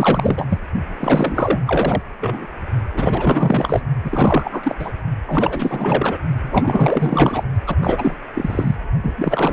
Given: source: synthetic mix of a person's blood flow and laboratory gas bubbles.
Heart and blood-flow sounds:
Doppler ultrasound of blood flow; precordium
0.00-0.45 s: bubbles
0.49-0.59 s: bubbles
0.99-1.58 s: bubbles
1.65-2.01 s: bubbles
2.20-2.46 s: bubbles
2.94-3.85 s: bubbles
4.04-4.75 s: bubbles
4.79-4.93 s: bubbles
5.26-6.17 s: bubbles
6.43-7.43 s: bubbles
7.67-7.76 s: bubbles
7.80-8.14 s: bubbles
8.35-8.90 s: bubbles
9.03-9.53 s: bubbles
From the record:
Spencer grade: 4 (maximum detectable bubble signal sounding continuously throughout systole and diastole of every cardiac period, and overriding the amplitude of the normal cardiac signals); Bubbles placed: only in the low amplitude regions of the cardiac cycle

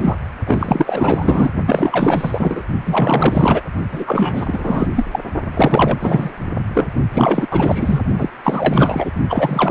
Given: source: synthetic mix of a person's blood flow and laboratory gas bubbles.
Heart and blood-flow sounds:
Doppler ultrasound of blood flow; precordium
0.00-0.16 s: bubbles
0.46-1.52 s: bubbles
1.67-2.62 s: bubbles
2.85-3.62 s: bubbles
3.92-4.88 s: bubbles
4.96-5.07 s: bubbles
5.11-5.20 s: bubbles
5.54-6.31 s: bubbles
6.74-6.88 s: bubbles
7.13-7.49 s: bubbles
7.51-8.03 s: bubbles
8.17-8.29 s: bubbles
8.44-9.11 s: bubbles
9.29-9.71 s: bubbles
From the record:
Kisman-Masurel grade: 444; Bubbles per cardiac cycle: continuous sound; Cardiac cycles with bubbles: 100%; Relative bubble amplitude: maximal (0.775 to 0.999); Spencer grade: 4 (maximum detectable bubble signal sounding continuously throughout systole and diastole of every cardiac period, and overriding the amplitude of the normal cardiac signals); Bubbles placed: only in the low amplitude regions of the cardiac cycle

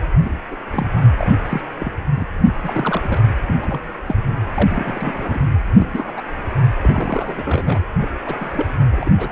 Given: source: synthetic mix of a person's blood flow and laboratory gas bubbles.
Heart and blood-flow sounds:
Doppler ultrasound of blood flow; precordium
0.23-0.33 s: bubbles
0.50-0.56 s: bubbles
0.70-0.89 s: bubbles
1.18-1.30 s: bubbles
1.45-1.61 s: bubbles
1.79-1.92 s: bubbles
2.16-2.25 s: bubbles
2.63-3.35 s: bubbles
3.44-3.55 s: bubbles
3.60-3.97 s: bubbles
4.06-4.15 s: bubbles
4.53-5.39 s: bubbles
5.71-6.14 s: bubbles
6.17-6.21 s: bubbles
6.81-7.80 s: bubbles
8.01-8.08 s: bubbles
8.26-8.69 s: bubbles
8.91-9.10 s: bubbles
9.17-9.32 s: bubbles
From the record:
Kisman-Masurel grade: 242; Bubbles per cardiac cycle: several, 3 to 8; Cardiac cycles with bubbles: 100%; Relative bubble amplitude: moderate (0.250 to 0.450); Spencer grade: 3 (all of the cardiac periods contain showers or single bubble signals, but not dominating or overriding the cardiac motion signals); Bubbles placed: anywhere in the cardiac cycle

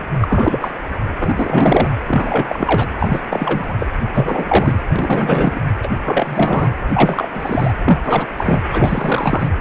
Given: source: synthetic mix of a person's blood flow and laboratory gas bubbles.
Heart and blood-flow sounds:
Doppler ultrasound of blood flow; precordium
0.00-0.05 s: bubbles
0.21-0.72 s: bubbles
1.18-1.90 s: bubbles
2.06-2.87 s: bubbles
2.98-3.21 s: bubbles
3.31-3.75 s: bubbles
3.79-3.87 s: bubbles
4.14-4.83 s: bubbles
4.87-5.60 s: bubbles
5.83-5.88 s: bubbles
5.98-6.71 s: bubbles
6.94-7.29 s: bubbles
7.34-7.73 s: bubbles
7.85-8.00 s: bubbles
8.03-8.32 s: bubbles
8.37-8.62 s: bubbles
8.72-9.48 s: bubbles
From the record:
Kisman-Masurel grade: 343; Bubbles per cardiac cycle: rolling drumbeat, 9 or more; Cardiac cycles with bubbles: 100%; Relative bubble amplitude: loud (0.450 to 0.775); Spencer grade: 3 (all of the cardiac periods contain showers or single bubble signals, but not dominating or overriding the cardiac motion signals); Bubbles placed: anywhere in the cardiac cycle

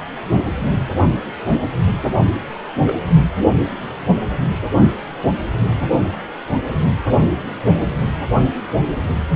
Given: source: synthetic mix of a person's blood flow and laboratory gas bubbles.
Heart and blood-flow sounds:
Doppler ultrasound of blood flow; precordium
2.86-2.96 s: bubbles
From the record:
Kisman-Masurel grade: 112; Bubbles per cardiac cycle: 1 to 2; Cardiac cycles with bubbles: 1 to 10%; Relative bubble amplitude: moderate (0.250 to 0.450); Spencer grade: 1 (occasional bubble signal discernible with the cardiac motion signal, with majority of cardiac periods free of bubbles); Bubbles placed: only in the low amplitude regions of the cardiac cycle

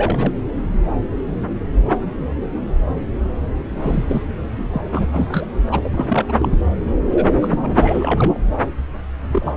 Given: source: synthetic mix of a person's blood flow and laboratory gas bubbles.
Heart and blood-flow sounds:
Doppler ultrasound of blood flow; subclavian vein
0.00-0.31 s: bubbles
3.77-4.04 s: bubbles
4.08-4.23 s: bubbles
4.57-4.67 s: bubbles
4.71-4.81 s: bubbles
4.92-5.07 s: bubbles
5.13-5.46 s: bubbles
5.67-5.79 s: bubbles
5.84-6.33 s: bubbles
6.38-6.58 s: bubbles
7.11-7.28 s: bubbles
7.41-7.59 s: bubbles
7.62-8.38 s: bubbles
9.32-9.53 s: bubbles
From the record:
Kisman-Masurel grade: 332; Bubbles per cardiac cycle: rolling drumbeat, 9 or more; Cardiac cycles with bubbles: 50 to 99%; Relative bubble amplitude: moderate (0.250 to 0.450); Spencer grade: 3 (all of the cardiac periods contain showers or single bubble signals, but not dominating or overriding the cardiac motion signals); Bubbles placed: anywhere in the cardiac cycle

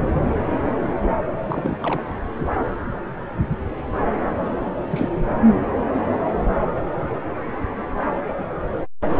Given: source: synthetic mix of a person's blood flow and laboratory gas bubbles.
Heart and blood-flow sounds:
Doppler ultrasound of blood flow; subclavian vein
1.46-1.77 s: bubbles
1.81-2.03 s: bubbles
4.90-5.09 s: bubbles
From the record:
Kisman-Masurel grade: 221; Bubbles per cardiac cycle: several, 3 to 8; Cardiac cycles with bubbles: 10 to 50%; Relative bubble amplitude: barely perceptible (0.100 to 0.250); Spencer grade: 2 (many but less than half of the cardiac periods contain bubble signals, singularly or in groups); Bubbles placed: anywhere in the cardiac cycle

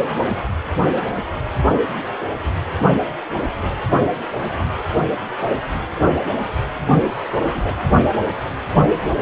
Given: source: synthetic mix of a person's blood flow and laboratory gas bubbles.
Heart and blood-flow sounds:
Doppler ultrasound of blood flow; precordium
7.33-7.80 s: bubbles
From the record:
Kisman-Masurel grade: 112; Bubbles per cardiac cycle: 1 to 2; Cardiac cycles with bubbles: 1 to 10%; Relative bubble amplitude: moderate (0.250 to 0.450); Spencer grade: 1 (occasional bubble signal discernible with the cardiac motion signal, with majority of cardiac periods free of bubbles); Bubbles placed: anywhere in the cardiac cycle

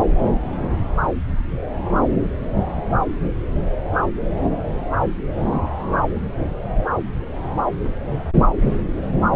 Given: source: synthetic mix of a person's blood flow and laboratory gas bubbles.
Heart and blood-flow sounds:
Doppler ultrasound of blood flow; subclavian vein
no bubbles
From the record:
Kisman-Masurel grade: 000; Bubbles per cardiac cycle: 0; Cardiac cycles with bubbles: 0%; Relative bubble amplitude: no bubbles discernible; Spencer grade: 0 (complete lack of bubble signals)

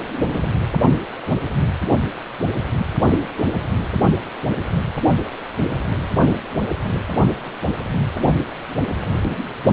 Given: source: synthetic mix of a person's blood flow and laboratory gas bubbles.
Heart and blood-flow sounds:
Doppler ultrasound of blood flow; precordium
0.36-0.45 s: bubbles
From the record:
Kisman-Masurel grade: 122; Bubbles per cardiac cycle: 1 to 2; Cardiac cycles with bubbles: 10 to 50%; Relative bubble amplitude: moderate (0.250 to 0.450); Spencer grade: 2 (many but less than half of the cardiac periods contain bubble signals, singularly or in groups); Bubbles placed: anywhere in the cardiac cycle

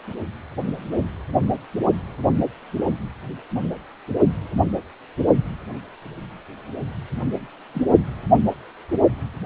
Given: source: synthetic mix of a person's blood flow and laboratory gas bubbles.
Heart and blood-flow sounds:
Doppler ultrasound of blood flow; precordium
7.73-7.82 s: bubbles
From the record:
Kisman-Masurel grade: 111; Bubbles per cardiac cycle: 1 to 2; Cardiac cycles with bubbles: 1 to 10%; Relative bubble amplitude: barely perceptible (0.100 to 0.250); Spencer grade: 1 (occasional bubble signal discernible with the cardiac motion signal, with majority of cardiac periods free of bubbles); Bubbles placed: only in the low amplitude regions of the cardiac cycle

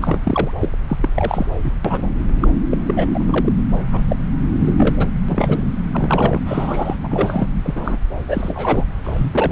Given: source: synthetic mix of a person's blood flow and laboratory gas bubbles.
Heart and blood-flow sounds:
Doppler ultrasound of blood flow; subclavian vein
0.00-0.20 s: bubbles
0.23-0.51 s: bubbles
0.59-0.68 s: bubbles
0.88-0.97 s: bubbles
1.00-1.09 s: bubbles
1.16-1.46 s: bubbles
1.61-1.73 s: bubbles
1.85-2.10 s: bubbles
2.40-2.48 s: bubbles
2.71-2.77 s: bubbles
2.86-3.08 s: bubbles
3.14-3.52 s: bubbles
3.92-4.04 s: bubbles
4.08-4.16 s: bubbles
4.60-5.07 s: bubbles
5.29-5.73 s: bubbles
5.92-6.42 s: bubbles
6.46-6.97 s: bubbles
7.04-7.08 s: bubbles
7.11-7.49 s: bubbles
7.64-7.98 s: bubbles
8.28-8.85 s: bubbles
9.03-9.52 s: bubbles
From the record:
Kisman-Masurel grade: 242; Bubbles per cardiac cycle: several, 3 to 8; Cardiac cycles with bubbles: 100%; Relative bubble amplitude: moderate (0.250 to 0.450); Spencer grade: 3 (all of the cardiac periods contain showers or single bubble signals, but not dominating or overriding the cardiac motion signals); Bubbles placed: anywhere in the cardiac cycle

